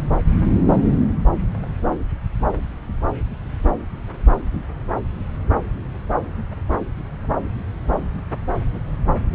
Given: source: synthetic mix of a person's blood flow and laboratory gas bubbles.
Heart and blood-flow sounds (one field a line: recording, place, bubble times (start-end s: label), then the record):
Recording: Doppler ultrasound of blood flow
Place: subclavian vein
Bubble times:
no bubbles
From the record:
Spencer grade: 0 (complete lack of bubble signals)